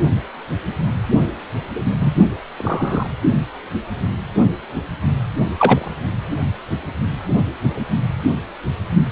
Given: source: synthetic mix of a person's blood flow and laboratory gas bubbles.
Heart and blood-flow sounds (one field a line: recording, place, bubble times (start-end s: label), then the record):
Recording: Doppler ultrasound of blood flow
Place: precordium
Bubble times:
1.73-2.15 s: bubbles
2.58-3.08 s: bubbles
5.58-5.89 s: bubbles
From the record:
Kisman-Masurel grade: 123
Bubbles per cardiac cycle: 1 to 2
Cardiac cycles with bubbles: 10 to 50%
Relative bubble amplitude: loud (0.450 to 0.775)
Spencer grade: 2 (many but less than half of the cardiac periods contain bubble signals, singularly or in groups)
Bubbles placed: only in the low amplitude regions of the cardiac cycle